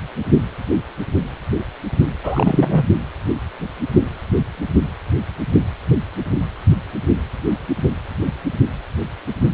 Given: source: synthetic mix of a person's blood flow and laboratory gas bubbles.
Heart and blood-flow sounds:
Doppler ultrasound of blood flow; precordium
2.23-2.85 s: bubbles
From the record:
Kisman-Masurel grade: 213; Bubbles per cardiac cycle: several, 3 to 8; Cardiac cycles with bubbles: 1 to 10%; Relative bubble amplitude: loud (0.450 to 0.775); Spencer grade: 1 (occasional bubble signal discernible with the cardiac motion signal, with majority of cardiac periods free of bubbles); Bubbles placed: only in the low amplitude regions of the cardiac cycle

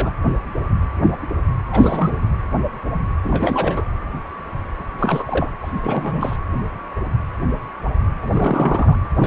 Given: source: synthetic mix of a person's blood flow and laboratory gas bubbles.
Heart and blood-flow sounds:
Doppler ultrasound of blood flow; precordium
0.00-0.11 s: bubbles
1.72-2.12 s: bubbles
3.24-3.85 s: bubbles
4.98-5.50 s: bubbles
5.62-6.36 s: bubbles
8.21-8.27 s: bubbles
8.31-8.96 s: bubbles
9.20-9.27 s: bubbles
From the record:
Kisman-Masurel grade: 332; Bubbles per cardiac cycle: rolling drumbeat, 9 or more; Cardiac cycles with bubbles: 50 to 99%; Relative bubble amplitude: moderate (0.250 to 0.450); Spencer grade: 3 (all of the cardiac periods contain showers or single bubble signals, but not dominating or overriding the cardiac motion signals); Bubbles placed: anywhere in the cardiac cycle

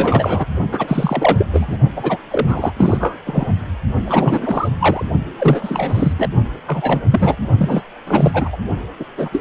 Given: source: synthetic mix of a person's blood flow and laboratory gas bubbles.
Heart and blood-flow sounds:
Doppler ultrasound of blood flow; precordium
0.00-0.46 s: bubbles
0.72-1.47 s: bubbles
1.53-1.77 s: bubbles
1.96-2.17 s: bubbles
2.31-2.73 s: bubbles
2.77-3.19 s: bubbles
3.25-3.52 s: bubbles
4.04-4.69 s: bubbles
4.79-5.05 s: bubbles
5.38-6.12 s: bubbles
6.19-6.29 s: bubbles
6.67-7.01 s: bubbles
7.12-7.36 s: bubbles
7.57-7.82 s: bubbles
8.07-8.56 s: bubbles
8.99-9.04 s: bubbles
9.17-9.29 s: bubbles
9.32-9.41 s: bubbles
From the record:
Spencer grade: 3 (all of the cardiac periods contain showers or single bubble signals, but not dominating or overriding the cardiac motion signals); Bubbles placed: only in the low amplitude regions of the cardiac cycle

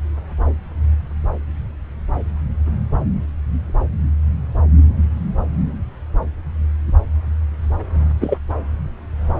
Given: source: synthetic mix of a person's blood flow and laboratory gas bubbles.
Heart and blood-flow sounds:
Doppler ultrasound of blood flow; subclavian vein
8.21-8.38 s: bubbles
From the record:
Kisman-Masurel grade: 123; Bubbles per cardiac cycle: 1 to 2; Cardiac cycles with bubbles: 10 to 50%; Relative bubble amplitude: loud (0.450 to 0.775); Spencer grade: 2 (many but less than half of the cardiac periods contain bubble signals, singularly or in groups); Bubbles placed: anywhere in the cardiac cycle

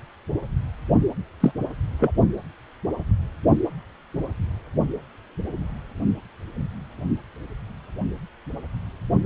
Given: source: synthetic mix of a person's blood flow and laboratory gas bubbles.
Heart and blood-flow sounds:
Doppler ultrasound of blood flow; precordium
1.40-1.51 s: bubbles
1.99-2.12 s: bubbles
From the record:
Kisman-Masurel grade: 123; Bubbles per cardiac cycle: 1 to 2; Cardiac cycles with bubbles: 10 to 50%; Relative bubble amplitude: loud (0.450 to 0.775); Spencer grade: 2 (many but less than half of the cardiac periods contain bubble signals, singularly or in groups); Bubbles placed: only in the low amplitude regions of the cardiac cycle

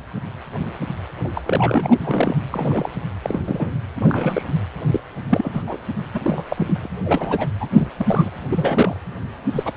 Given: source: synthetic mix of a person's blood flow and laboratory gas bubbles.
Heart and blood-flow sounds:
Doppler ultrasound of blood flow; precordium
1.24-1.29 s: bubbles
1.33-1.42 s: bubbles
1.46-2.37 s: bubbles
2.51-2.90 s: bubbles
3.22-3.40 s: bubbles
3.44-3.74 s: bubbles
3.96-4.45 s: bubbles
4.91-5.00 s: bubbles
5.29-5.63 s: bubbles
5.66-5.78 s: bubbles
6.13-6.45 s: bubbles
6.49-6.88 s: bubbles
7.04-7.49 s: bubbles
7.60-7.67 s: bubbles
7.72-7.88 s: bubbles
7.97-8.30 s: bubbles
8.49-8.97 s: bubbles
9.55-9.72 s: bubbles
From the record:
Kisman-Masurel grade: 232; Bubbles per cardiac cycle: several, 3 to 8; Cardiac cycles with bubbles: 50 to 99%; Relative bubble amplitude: moderate (0.250 to 0.450); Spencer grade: 3 (all of the cardiac periods contain showers or single bubble signals, but not dominating or overriding the cardiac motion signals); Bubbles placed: anywhere in the cardiac cycle

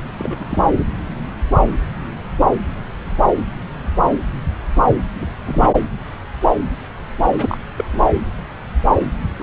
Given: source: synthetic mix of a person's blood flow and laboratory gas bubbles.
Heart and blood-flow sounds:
Doppler ultrasound of blood flow; subclavian vein
0.18-0.45 s: bubbles
0.50-0.59 s: bubbles
5.20-5.28 s: bubbles
5.46-5.69 s: bubbles
7.37-7.58 s: bubbles
7.76-7.85 s: bubbles
7.93-8.12 s: bubbles
9.38-9.43 s: bubbles
From the record:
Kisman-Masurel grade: 232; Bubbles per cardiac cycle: several, 3 to 8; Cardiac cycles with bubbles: 50 to 99%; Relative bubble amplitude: moderate (0.250 to 0.450); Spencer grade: 3 (all of the cardiac periods contain showers or single bubble signals, but not dominating or overriding the cardiac motion signals); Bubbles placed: anywhere in the cardiac cycle

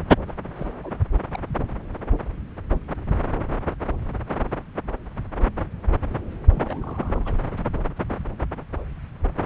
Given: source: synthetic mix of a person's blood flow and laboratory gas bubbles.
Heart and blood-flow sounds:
Doppler ultrasound of blood flow; subclavian vein
0.27-0.34 s: bubbles
0.55-0.67 s: bubbles
0.83-0.93 s: bubbles
1.31-1.39 s: bubbles
6.49-7.38 s: bubbles
From the record:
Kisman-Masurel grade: 221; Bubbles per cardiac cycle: several, 3 to 8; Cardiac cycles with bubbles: 10 to 50%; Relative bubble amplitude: barely perceptible (0.100 to 0.250); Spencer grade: 2 (many but less than half of the cardiac periods contain bubble signals, singularly or in groups); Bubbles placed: anywhere in the cardiac cycle

